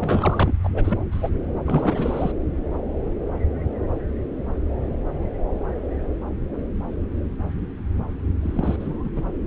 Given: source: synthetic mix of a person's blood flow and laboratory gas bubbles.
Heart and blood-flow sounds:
Doppler ultrasound of blood flow; subclavian vein
0.01-0.53 s: bubbles
0.64-0.69 s: bubbles
0.74-0.98 s: bubbles
1.11-1.30 s: bubbles
1.66-2.32 s: bubbles
8.42-8.76 s: bubbles
8.79-8.98 s: bubbles
9.04-9.09 s: bubbles
9.15-9.22 s: bubbles
From the record:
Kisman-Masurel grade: 221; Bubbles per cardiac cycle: several, 3 to 8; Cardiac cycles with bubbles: 10 to 50%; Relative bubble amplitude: barely perceptible (0.100 to 0.250); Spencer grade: 2 (many but less than half of the cardiac periods contain bubble signals, singularly or in groups); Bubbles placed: anywhere in the cardiac cycle

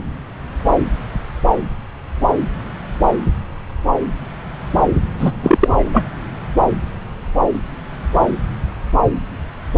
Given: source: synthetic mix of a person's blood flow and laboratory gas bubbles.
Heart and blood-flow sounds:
Doppler ultrasound of blood flow; subclavian vein
5.18-5.32 s: bubbles
5.42-5.69 s: bubbles
5.76-6.09 s: bubbles
From the record:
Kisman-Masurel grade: 213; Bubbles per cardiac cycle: several, 3 to 8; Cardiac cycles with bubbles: 1 to 10%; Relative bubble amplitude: loud (0.450 to 0.775); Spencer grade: 1 (occasional bubble signal discernible with the cardiac motion signal, with majority of cardiac periods free of bubbles); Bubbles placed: anywhere in the cardiac cycle

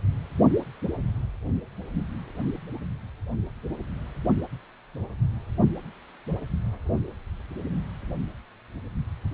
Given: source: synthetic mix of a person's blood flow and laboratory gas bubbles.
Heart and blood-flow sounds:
Doppler ultrasound of blood flow; precordium
no bubbles
From the record:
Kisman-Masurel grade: 000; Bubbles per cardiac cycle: 0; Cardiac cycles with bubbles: 0%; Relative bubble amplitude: no bubbles discernible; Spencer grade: 0 (complete lack of bubble signals)

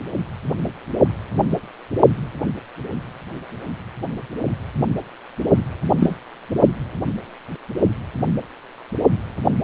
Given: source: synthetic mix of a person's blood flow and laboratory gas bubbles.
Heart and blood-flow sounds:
Doppler ultrasound of blood flow; precordium
5.99-6.15 s: bubbles
From the record:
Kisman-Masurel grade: 112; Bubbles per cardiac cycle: 1 to 2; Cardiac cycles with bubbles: 1 to 10%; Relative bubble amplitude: moderate (0.250 to 0.450); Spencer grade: 1 (occasional bubble signal discernible with the cardiac motion signal, with majority of cardiac periods free of bubbles); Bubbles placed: only in the low amplitude regions of the cardiac cycle

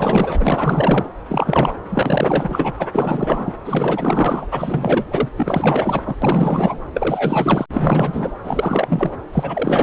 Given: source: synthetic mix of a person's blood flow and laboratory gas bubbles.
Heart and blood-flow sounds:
Doppler ultrasound of blood flow; subclavian vein
0.00-1.08 s: bubbles
1.29-1.76 s: bubbles
1.89-2.74 s: bubbles
2.78-2.88 s: bubbles
2.92-3.53 s: bubbles
3.65-4.47 s: bubbles
4.51-5.29 s: bubbles
5.36-6.16 s: bubbles
6.22-6.79 s: bubbles
6.93-7.66 s: bubbles
7.73-8.31 s: bubbles
8.44-9.12 s: bubbles
9.32-9.83 s: bubbles
From the record:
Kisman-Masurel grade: 444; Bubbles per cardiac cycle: continuous sound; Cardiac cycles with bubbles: 100%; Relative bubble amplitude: maximal (0.775 to 0.999); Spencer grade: 4 (maximum detectable bubble signal sounding continuously throughout systole and diastole of every cardiac period, and overriding the amplitude of the normal cardiac signals); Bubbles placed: anywhere in the cardiac cycle

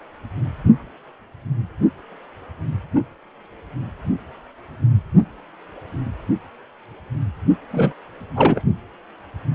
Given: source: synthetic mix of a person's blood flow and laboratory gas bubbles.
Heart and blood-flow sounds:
Doppler ultrasound of blood flow; precordium
7.71-7.92 s: bubbles
8.36-8.64 s: bubbles
From the record:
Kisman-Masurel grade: 223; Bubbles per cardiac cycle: several, 3 to 8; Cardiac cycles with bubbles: 10 to 50%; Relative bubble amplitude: loud (0.450 to 0.775); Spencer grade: 2 (many but less than half of the cardiac periods contain bubble signals, singularly or in groups); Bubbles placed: only in the low amplitude regions of the cardiac cycle

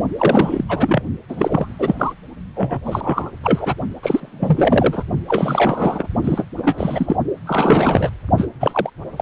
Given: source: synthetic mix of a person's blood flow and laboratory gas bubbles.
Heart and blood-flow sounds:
Doppler ultrasound of blood flow; precordium
0.17-0.65 s: bubbles
0.69-1.02 s: bubbles
1.28-1.75 s: bubbles
1.79-1.94 s: bubbles
1.98-2.13 s: bubbles
2.56-2.80 s: bubbles
2.84-3.31 s: bubbles
3.43-3.74 s: bubbles
4.03-5.05 s: bubbles
5.29-6.07 s: bubbles
6.24-6.46 s: bubbles
6.58-7.17 s: bubbles
7.46-8.09 s: bubbles
8.37-8.46 s: bubbles
8.60-8.90 s: bubbles
9.17-9.22 s: bubbles
From the record:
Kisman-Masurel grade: 343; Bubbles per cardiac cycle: rolling drumbeat, 9 or more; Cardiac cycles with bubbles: 100%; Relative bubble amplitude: loud (0.450 to 0.775); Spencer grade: 3 (all of the cardiac periods contain showers or single bubble signals, but not dominating or overriding the cardiac motion signals); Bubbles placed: only in the low amplitude regions of the cardiac cycle

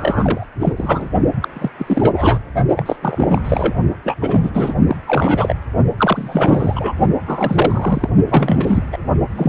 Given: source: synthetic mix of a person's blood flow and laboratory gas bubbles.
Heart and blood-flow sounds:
Doppler ultrasound of blood flow; precordium
0.00-0.46 s: bubbles
0.59-0.73 s: bubbles
0.76-1.09 s: bubbles
1.42-1.48 s: bubbles
1.53-1.70 s: bubbles
1.78-2.38 s: bubbles
2.76-2.96 s: bubbles
3.01-3.42 s: bubbles
3.45-3.74 s: bubbles
4.04-4.16 s: bubbles
4.21-4.74 s: bubbles
4.87-4.96 s: bubbles
5.07-5.55 s: bubbles
5.97-6.93 s: bubbles
7.26-8.10 s: bubbles
8.27-8.83 s: bubbles
8.92-8.97 s: bubbles
9.30-9.49 s: bubbles
From the record:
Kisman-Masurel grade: 342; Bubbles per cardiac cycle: rolling drumbeat, 9 or more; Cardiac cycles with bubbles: 100%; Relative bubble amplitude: moderate (0.250 to 0.450); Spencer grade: 3 (all of the cardiac periods contain showers or single bubble signals, but not dominating or overriding the cardiac motion signals); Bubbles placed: only in the low amplitude regions of the cardiac cycle

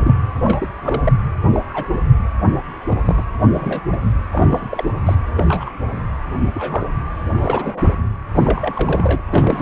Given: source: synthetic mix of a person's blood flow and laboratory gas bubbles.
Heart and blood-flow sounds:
Doppler ultrasound of blood flow; precordium
0.00-0.14 s: bubbles
0.44-0.68 s: bubbles
0.83-1.01 s: bubbles
1.04-1.12 s: bubbles
1.52-1.60 s: bubbles
1.70-1.88 s: bubbles
1.93-2.00 s: bubbles
2.88-2.98 s: bubbles
3.06-3.25 s: bubbles
3.52-3.82 s: bubbles
3.92-3.97 s: bubbles
4.32-4.84 s: bubbles
5.05-5.15 s: bubbles
5.37-5.71 s: bubbles
6.54-6.85 s: bubbles
7.32-7.96 s: bubbles
8.35-9.21 s: bubbles
9.29-9.62 s: bubbles
From the record:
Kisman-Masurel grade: 242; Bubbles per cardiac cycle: several, 3 to 8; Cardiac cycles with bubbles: 100%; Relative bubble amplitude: moderate (0.250 to 0.450); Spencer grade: 3 (all of the cardiac periods contain showers or single bubble signals, but not dominating or overriding the cardiac motion signals); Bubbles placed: anywhere in the cardiac cycle

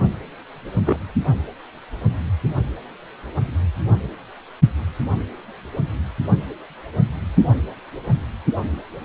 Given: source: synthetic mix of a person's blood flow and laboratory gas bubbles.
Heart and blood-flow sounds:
Doppler ultrasound of blood flow; precordium
0.85-1.00 s: bubbles
From the record:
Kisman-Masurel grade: 112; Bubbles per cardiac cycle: 1 to 2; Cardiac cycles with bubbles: 1 to 10%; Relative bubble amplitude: moderate (0.250 to 0.450); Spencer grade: 1 (occasional bubble signal discernible with the cardiac motion signal, with majority of cardiac periods free of bubbles); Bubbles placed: only in the low amplitude regions of the cardiac cycle

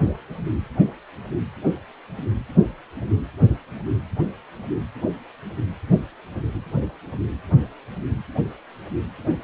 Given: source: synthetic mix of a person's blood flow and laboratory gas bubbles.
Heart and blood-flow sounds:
Doppler ultrasound of blood flow; precordium
no bubbles
From the record:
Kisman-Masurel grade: 000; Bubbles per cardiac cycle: 0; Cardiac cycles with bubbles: 0%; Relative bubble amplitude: no bubbles discernible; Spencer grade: 0 (complete lack of bubble signals)

